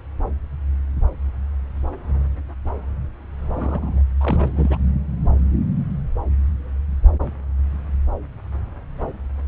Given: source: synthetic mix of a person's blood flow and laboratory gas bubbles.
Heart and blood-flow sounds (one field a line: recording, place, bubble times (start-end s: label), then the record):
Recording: Doppler ultrasound of blood flow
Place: subclavian vein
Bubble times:
3.53-4.02 s: bubbles
4.21-4.78 s: bubbles
From the record:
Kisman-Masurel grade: 221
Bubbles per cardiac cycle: several, 3 to 8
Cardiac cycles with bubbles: 10 to 50%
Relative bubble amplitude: barely perceptible (0.100 to 0.250)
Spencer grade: 2 (many but less than half of the cardiac periods contain bubble signals, singularly or in groups)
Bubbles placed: anywhere in the cardiac cycle